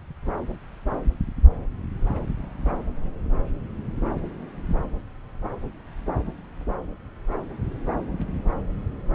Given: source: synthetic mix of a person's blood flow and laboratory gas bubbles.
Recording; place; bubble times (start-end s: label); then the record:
Doppler ultrasound of blood flow; subclavian vein
no bubbles
From the record:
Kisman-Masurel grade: 000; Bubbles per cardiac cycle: 0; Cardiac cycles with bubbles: 0%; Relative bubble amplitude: no bubbles discernible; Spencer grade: 0 (complete lack of bubble signals)